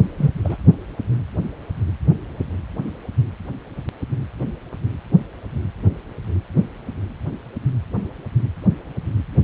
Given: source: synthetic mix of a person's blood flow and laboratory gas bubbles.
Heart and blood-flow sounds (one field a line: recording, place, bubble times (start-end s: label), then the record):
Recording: Doppler ultrasound of blood flow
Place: precordium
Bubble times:
0.17-0.30 s: bubbles
0.44-0.56 s: bubbles
From the record:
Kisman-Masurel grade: 213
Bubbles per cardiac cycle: several, 3 to 8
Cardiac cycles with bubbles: 1 to 10%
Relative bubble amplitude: loud (0.450 to 0.775)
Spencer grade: 1 (occasional bubble signal discernible with the cardiac motion signal, with majority of cardiac periods free of bubbles)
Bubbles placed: anywhere in the cardiac cycle